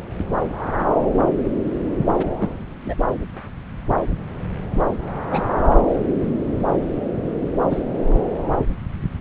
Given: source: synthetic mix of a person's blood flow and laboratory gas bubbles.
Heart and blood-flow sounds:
Doppler ultrasound of blood flow; subclavian vein
2.17-2.26 s: bubbles
2.38-2.49 s: bubbles
2.85-2.94 s: bubbles
5.30-5.47 s: bubbles
7.70-7.83 s: bubbles
From the record:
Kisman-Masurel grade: 121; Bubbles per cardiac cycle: 1 to 2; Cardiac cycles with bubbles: 10 to 50%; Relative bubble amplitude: barely perceptible (0.100 to 0.250); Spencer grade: 2 (many but less than half of the cardiac periods contain bubble signals, singularly or in groups); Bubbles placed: anywhere in the cardiac cycle

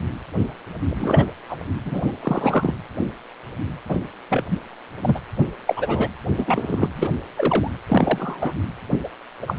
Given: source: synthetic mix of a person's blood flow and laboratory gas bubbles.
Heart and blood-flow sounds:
Doppler ultrasound of blood flow; precordium
0.89-1.26 s: bubbles
1.49-1.56 s: bubbles
1.85-2.12 s: bubbles
2.22-2.74 s: bubbles
3.89-3.96 s: bubbles
4.29-4.44 s: bubbles
4.50-4.57 s: bubbles
5.02-5.20 s: bubbles
5.67-6.08 s: bubbles
6.38-6.88 s: bubbles
6.96-7.09 s: bubbles
7.37-7.69 s: bubbles
7.86-8.54 s: bubbles
9.04-9.08 s: bubbles
9.42-9.56 s: bubbles
From the record:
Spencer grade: 3 (all of the cardiac periods contain showers or single bubble signals, but not dominating or overriding the cardiac motion signals); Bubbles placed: anywhere in the cardiac cycle

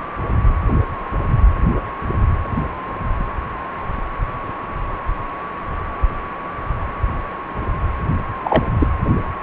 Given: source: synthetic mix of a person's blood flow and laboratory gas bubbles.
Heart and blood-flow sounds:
Doppler ultrasound of blood flow; precordium
8.43-8.67 s: bubbles
8.79-8.87 s: bubbles
From the record:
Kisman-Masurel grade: 123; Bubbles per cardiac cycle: 1 to 2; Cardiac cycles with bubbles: 10 to 50%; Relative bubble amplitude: loud (0.450 to 0.775); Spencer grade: 2 (many but less than half of the cardiac periods contain bubble signals, singularly or in groups); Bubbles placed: anywhere in the cardiac cycle

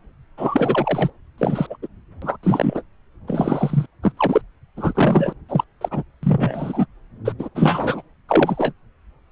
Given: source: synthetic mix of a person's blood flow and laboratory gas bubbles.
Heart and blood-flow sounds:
Doppler ultrasound of blood flow; subclavian vein
0.38-1.10 s: bubbles
1.38-1.67 s: bubbles
1.70-1.76 s: bubbles
1.82-1.87 s: bubbles
2.21-2.36 s: bubbles
2.43-2.82 s: bubbles
3.27-3.86 s: bubbles
4.03-4.12 s: bubbles
4.17-4.42 s: bubbles
4.77-5.33 s: bubbles
5.49-5.64 s: bubbles
5.81-5.89 s: bubbles
5.91-6.03 s: bubbles
6.23-6.86 s: bubbles
7.25-7.33 s: bubbles
7.39-7.49 s: bubbles
7.54-8.02 s: bubbles
8.29-8.72 s: bubbles
From the record:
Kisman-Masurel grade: 232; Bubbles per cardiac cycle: several, 3 to 8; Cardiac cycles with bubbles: 50 to 99%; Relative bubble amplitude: moderate (0.250 to 0.450); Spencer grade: 3 (all of the cardiac periods contain showers or single bubble signals, but not dominating or overriding the cardiac motion signals); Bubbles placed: anywhere in the cardiac cycle

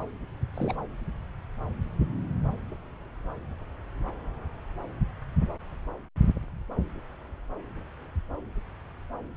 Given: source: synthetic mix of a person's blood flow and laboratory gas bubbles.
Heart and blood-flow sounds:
Doppler ultrasound of blood flow; subclavian vein
0.54-0.75 s: bubbles
From the record:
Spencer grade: 1 (occasional bubble signal discernible with the cardiac motion signal, with majority of cardiac periods free of bubbles); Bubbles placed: anywhere in the cardiac cycle

